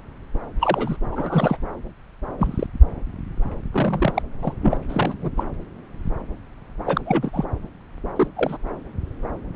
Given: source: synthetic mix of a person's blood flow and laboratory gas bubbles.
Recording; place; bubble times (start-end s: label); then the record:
Doppler ultrasound of blood flow; subclavian vein
0.60-0.97 s: bubbles
1.11-1.57 s: bubbles
2.38-2.67 s: bubbles
3.73-4.22 s: bubbles
4.42-4.54 s: bubbles
4.62-4.77 s: bubbles
4.88-5.14 s: bubbles
5.21-5.30 s: bubbles
5.37-5.44 s: bubbles
6.86-7.01 s: bubbles
7.05-7.30 s: bubbles
7.33-7.45 s: bubbles
8.15-8.28 s: bubbles
8.36-8.57 s: bubbles
9.54-9.56 s: bubbles
From the record:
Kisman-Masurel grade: 232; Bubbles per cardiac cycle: several, 3 to 8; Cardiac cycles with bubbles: 50 to 99%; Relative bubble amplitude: moderate (0.250 to 0.450); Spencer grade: 3 (all of the cardiac periods contain showers or single bubble signals, but not dominating or overriding the cardiac motion signals); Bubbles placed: anywhere in the cardiac cycle